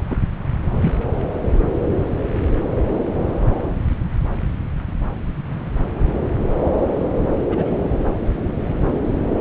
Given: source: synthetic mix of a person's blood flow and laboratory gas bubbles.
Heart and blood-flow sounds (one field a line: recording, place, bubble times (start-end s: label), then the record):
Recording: Doppler ultrasound of blood flow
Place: subclavian vein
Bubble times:
0.10-0.16 s: bubbles
0.81-0.92 s: bubbles
7.49-7.71 s: bubbles
From the record:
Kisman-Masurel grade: 122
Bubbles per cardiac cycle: 1 to 2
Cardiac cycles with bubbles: 10 to 50%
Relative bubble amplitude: moderate (0.250 to 0.450)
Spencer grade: 2 (many but less than half of the cardiac periods contain bubble signals, singularly or in groups)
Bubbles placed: anywhere in the cardiac cycle